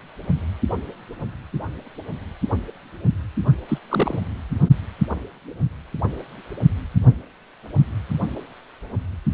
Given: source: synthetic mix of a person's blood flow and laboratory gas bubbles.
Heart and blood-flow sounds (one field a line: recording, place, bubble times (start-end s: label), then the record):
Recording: Doppler ultrasound of blood flow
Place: precordium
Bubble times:
3.68-3.79 s: bubbles
3.90-4.20 s: bubbles
From the record:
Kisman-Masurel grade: 212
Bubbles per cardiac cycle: several, 3 to 8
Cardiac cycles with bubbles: 1 to 10%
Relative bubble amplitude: moderate (0.250 to 0.450)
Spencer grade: 1 (occasional bubble signal discernible with the cardiac motion signal, with majority of cardiac periods free of bubbles)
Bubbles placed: only in the low amplitude regions of the cardiac cycle